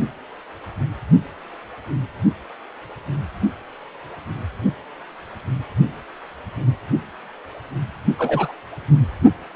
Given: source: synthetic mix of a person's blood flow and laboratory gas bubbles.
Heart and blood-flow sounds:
Doppler ultrasound of blood flow; precordium
8.18-8.52 s: bubbles
From the record:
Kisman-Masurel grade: 112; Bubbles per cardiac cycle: 1 to 2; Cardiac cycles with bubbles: 1 to 10%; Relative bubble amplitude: moderate (0.250 to 0.450); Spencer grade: 1 (occasional bubble signal discernible with the cardiac motion signal, with majority of cardiac periods free of bubbles); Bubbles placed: anywhere in the cardiac cycle

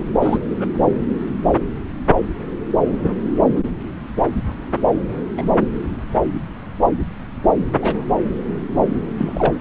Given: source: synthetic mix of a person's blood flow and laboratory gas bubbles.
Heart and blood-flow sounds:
Doppler ultrasound of blood flow; subclavian vein
0.00-0.04 s: bubbles
0.21-0.38 s: bubbles
0.58-0.68 s: bubbles
5.37-5.46 s: bubbles
7.82-8.05 s: bubbles
9.18-9.55 s: bubbles
From the record:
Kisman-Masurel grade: 122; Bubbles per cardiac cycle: 1 to 2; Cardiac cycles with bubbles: 10 to 50%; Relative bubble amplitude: moderate (0.250 to 0.450); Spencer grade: 2 (many but less than half of the cardiac periods contain bubble signals, singularly or in groups); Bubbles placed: anywhere in the cardiac cycle

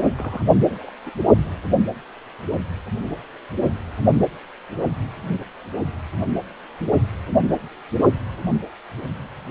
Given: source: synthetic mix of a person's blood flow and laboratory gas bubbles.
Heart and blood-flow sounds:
Doppler ultrasound of blood flow; precordium
0.15-0.44 s: bubbles
0.68-0.90 s: bubbles
1.06-1.10 s: bubbles
From the record:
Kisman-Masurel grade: 221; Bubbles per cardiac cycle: several, 3 to 8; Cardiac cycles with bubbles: 10 to 50%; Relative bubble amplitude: barely perceptible (0.100 to 0.250); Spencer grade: 2 (many but less than half of the cardiac periods contain bubble signals, singularly or in groups); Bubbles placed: only in the low amplitude regions of the cardiac cycle

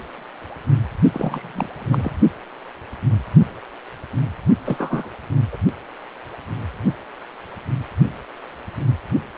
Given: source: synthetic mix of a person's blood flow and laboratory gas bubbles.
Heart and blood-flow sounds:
Doppler ultrasound of blood flow; precordium
1.14-1.68 s: bubbles
1.71-2.18 s: bubbles
4.65-5.09 s: bubbles
5.53-5.56 s: bubbles
From the record:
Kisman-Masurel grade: 222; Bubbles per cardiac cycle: several, 3 to 8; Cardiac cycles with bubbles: 10 to 50%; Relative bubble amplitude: moderate (0.250 to 0.450); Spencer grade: 2 (many but less than half of the cardiac periods contain bubble signals, singularly or in groups); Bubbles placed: only in the low amplitude regions of the cardiac cycle

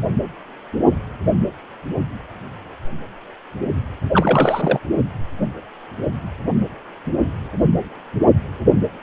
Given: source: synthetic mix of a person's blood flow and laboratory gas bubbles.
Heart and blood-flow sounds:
Doppler ultrasound of blood flow; precordium
4.12-4.79 s: bubbles
From the record:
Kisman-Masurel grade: 212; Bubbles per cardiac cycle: several, 3 to 8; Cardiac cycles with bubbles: 1 to 10%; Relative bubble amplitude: moderate (0.250 to 0.450); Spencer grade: 1 (occasional bubble signal discernible with the cardiac motion signal, with majority of cardiac periods free of bubbles); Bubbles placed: only in the low amplitude regions of the cardiac cycle

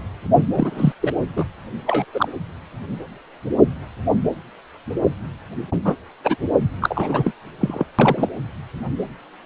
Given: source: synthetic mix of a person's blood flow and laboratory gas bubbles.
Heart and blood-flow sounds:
Doppler ultrasound of blood flow; precordium
0.52-0.93 s: bubbles
1.01-1.12 s: bubbles
1.36-1.44 s: bubbles
1.86-2.05 s: bubbles
2.14-2.28 s: bubbles
5.85-5.96 s: bubbles
6.23-6.36 s: bubbles
6.81-7.31 s: bubbles
7.60-7.84 s: bubbles
7.98-8.29 s: bubbles
From the record:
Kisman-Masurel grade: 232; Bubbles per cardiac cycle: several, 3 to 8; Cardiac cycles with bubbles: 50 to 99%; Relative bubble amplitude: moderate (0.250 to 0.450); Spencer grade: 3 (all of the cardiac periods contain showers or single bubble signals, but not dominating or overriding the cardiac motion signals); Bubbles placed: anywhere in the cardiac cycle

